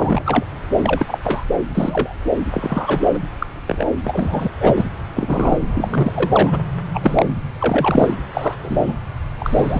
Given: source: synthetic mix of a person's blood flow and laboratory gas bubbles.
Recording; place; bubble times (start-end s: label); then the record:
Doppler ultrasound of blood flow; subclavian vein
0.00-0.22 s: bubbles
0.26-0.45 s: bubbles
0.82-1.06 s: bubbles
1.08-1.18 s: bubbles
1.23-1.44 s: bubbles
1.75-2.15 s: bubbles
2.53-3.03 s: bubbles
3.13-3.19 s: bubbles
3.38-3.46 s: bubbles
3.67-3.85 s: bubbles
4.04-4.49 s: bubbles
4.59-4.84 s: bubbles
5.16-5.59 s: bubbles
5.75-6.58 s: bubbles
6.93-7.33 s: bubbles
7.59-8.15 s: bubbles
8.33-8.55 s: bubbles
8.62-8.94 s: bubbles
9.39-9.80 s: bubbles
From the record:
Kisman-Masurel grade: 243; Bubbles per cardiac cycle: several, 3 to 8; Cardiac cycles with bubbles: 100%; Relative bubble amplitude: loud (0.450 to 0.775); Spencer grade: 3 (all of the cardiac periods contain showers or single bubble signals, but not dominating or overriding the cardiac motion signals); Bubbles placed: anywhere in the cardiac cycle